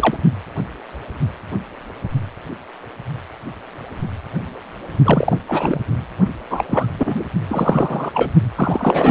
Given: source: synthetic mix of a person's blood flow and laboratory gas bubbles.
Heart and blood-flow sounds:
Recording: Doppler ultrasound of blood flow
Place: precordium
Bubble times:
0.00-0.17 s: bubbles
5.04-5.37 s: bubbles
5.48-5.80 s: bubbles
6.50-6.65 s: bubbles
6.68-6.87 s: bubbles
6.98-7.15 s: bubbles
7.49-8.11 s: bubbles
8.14-8.31 s: bubbles
8.56-9.10 s: bubbles
From the record:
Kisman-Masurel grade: 223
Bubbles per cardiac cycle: several, 3 to 8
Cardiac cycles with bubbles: 10 to 50%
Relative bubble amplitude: loud (0.450 to 0.775)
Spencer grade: 2 (many but less than half of the cardiac periods contain bubble signals, singularly or in groups)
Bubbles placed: only in the low amplitude regions of the cardiac cycle

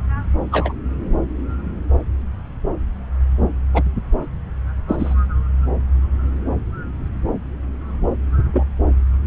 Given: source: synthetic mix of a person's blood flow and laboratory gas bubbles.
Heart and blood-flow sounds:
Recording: Doppler ultrasound of blood flow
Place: subclavian vein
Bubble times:
0.51-0.73 s: bubbles
3.74-3.83 s: bubbles
4.88-5.15 s: bubbles
8.53-8.67 s: bubbles
From the record:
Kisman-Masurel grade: 123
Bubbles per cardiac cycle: 1 to 2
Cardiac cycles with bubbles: 10 to 50%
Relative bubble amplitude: loud (0.450 to 0.775)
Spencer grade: 2 (many but less than half of the cardiac periods contain bubble signals, singularly or in groups)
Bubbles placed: anywhere in the cardiac cycle

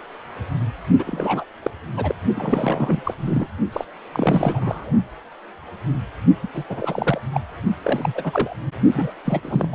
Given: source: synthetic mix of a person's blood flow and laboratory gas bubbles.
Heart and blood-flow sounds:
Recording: Doppler ultrasound of blood flow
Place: precordium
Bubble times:
0.98-1.44 s: bubbles
1.62-1.70 s: bubbles
1.96-2.15 s: bubbles
2.35-3.14 s: bubbles
3.17-3.47 s: bubbles
3.73-3.84 s: bubbles
4.12-4.91 s: bubbles
6.42-6.48 s: bubbles
6.54-6.64 s: bubbles
6.69-7.19 s: bubbles
7.33-7.41 s: bubbles
7.84-8.56 s: bubbles
8.94-9.11 s: bubbles
9.25-9.68 s: bubbles
9.72-9.75 s: bubbles
From the record:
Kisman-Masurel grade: 332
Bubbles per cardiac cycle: rolling drumbeat, 9 or more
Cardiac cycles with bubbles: 50 to 99%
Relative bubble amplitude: moderate (0.250 to 0.450)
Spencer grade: 3 (all of the cardiac periods contain showers or single bubble signals, but not dominating or overriding the cardiac motion signals)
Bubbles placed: only in the low amplitude regions of the cardiac cycle

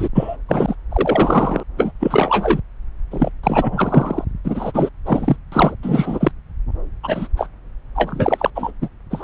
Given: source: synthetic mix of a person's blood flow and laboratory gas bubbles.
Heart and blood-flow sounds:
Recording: Doppler ultrasound of blood flow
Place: subclavian vein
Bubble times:
0.00-0.08 s: bubbles
0.14-0.36 s: bubbles
0.48-0.75 s: bubbles
0.90-1.64 s: bubbles
1.77-1.92 s: bubbles
2.00-2.59 s: bubbles
3.10-3.30 s: bubbles
3.43-4.25 s: bubbles
4.44-4.89 s: bubbles
5.05-5.37 s: bubbles
5.51-5.75 s: bubbles
5.83-6.31 s: bubbles
7.03-7.28 s: bubbles
7.37-7.47 s: bubbles
7.95-8.50 s: bubbles
8.55-8.71 s: bubbles
8.81-8.88 s: bubbles
9.11-9.24 s: bubbles
From the record:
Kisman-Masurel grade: 333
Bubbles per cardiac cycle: rolling drumbeat, 9 or more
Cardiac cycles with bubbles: 50 to 99%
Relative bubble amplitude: loud (0.450 to 0.775)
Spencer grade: 3 (all of the cardiac periods contain showers or single bubble signals, but not dominating or overriding the cardiac motion signals)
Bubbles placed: anywhere in the cardiac cycle

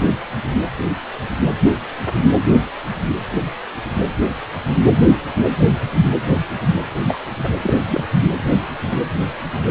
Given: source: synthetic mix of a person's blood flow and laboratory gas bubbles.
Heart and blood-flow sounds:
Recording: Doppler ultrasound of blood flow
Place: precordium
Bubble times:
7.08-7.20 s: bubbles
7.44-7.49 s: bubbles
7.62-7.76 s: bubbles
7.89-8.03 s: bubbles
From the record:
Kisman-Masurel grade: 222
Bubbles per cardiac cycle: several, 3 to 8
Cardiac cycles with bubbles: 10 to 50%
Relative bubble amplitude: moderate (0.250 to 0.450)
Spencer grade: 2 (many but less than half of the cardiac periods contain bubble signals, singularly or in groups)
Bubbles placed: anywhere in the cardiac cycle

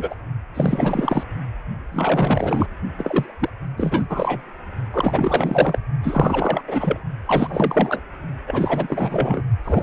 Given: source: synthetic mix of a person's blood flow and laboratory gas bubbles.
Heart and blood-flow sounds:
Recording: Doppler ultrasound of blood flow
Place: precordium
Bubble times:
0.00-0.15 s: bubbles
0.54-1.23 s: bubbles
1.92-2.67 s: bubbles
2.98-3.50 s: bubbles
3.77-4.42 s: bubbles
4.92-5.79 s: bubbles
6.03-6.62 s: bubbles
6.67-7.00 s: bubbles
7.25-8.00 s: bubbles
8.47-9.43 s: bubbles
9.64-9.83 s: bubbles
From the record:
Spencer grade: 4 (maximum detectable bubble signal sounding continuously throughout systole and diastole of every cardiac period, and overriding the amplitude of the normal cardiac signals)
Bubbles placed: only in the low amplitude regions of the cardiac cycle

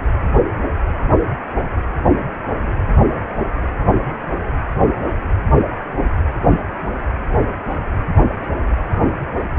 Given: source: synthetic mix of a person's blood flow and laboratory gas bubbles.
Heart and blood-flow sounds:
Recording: Doppler ultrasound of blood flow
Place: precordium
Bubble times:
no bubbles
From the record:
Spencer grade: 0 (complete lack of bubble signals)

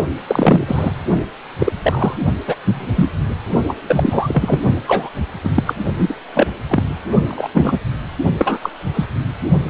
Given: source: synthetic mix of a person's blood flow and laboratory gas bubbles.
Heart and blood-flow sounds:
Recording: Doppler ultrasound of blood flow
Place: precordium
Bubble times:
0.28-0.94 s: bubbles
1.59-1.72 s: bubbles
1.82-2.14 s: bubbles
2.47-2.56 s: bubbles
2.64-2.87 s: bubbles
2.94-3.09 s: bubbles
3.68-3.75 s: bubbles
3.86-4.60 s: bubbles
4.87-5.10 s: bubbles
5.44-5.51 s: bubbles
5.55-5.63 s: bubbles
5.66-5.74 s: bubbles
5.98-6.15 s: bubbles
6.34-6.56 s: bubbles
6.68-6.88 s: bubbles
7.28-7.48 s: bubbles
7.54-7.79 s: bubbles
8.38-8.58 s: bubbles
8.62-8.70 s: bubbles
8.94-9.05 s: bubbles
From the record:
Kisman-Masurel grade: 243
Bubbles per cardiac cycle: several, 3 to 8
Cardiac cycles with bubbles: 100%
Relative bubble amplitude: loud (0.450 to 0.775)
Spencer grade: 3 (all of the cardiac periods contain showers or single bubble signals, but not dominating or overriding the cardiac motion signals)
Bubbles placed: only in the low amplitude regions of the cardiac cycle

